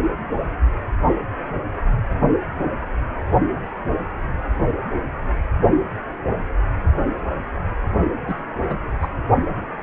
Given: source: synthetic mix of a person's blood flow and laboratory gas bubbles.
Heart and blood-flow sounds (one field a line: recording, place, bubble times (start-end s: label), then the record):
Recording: Doppler ultrasound of blood flow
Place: precordium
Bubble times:
8.28-8.35 s: bubbles
8.69-8.76 s: bubbles
9.02-9.08 s: bubbles
From the record:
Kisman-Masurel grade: 212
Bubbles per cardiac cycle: several, 3 to 8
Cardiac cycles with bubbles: 1 to 10%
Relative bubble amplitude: moderate (0.250 to 0.450)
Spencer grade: 1 (occasional bubble signal discernible with the cardiac motion signal, with majority of cardiac periods free of bubbles)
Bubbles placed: only in the low amplitude regions of the cardiac cycle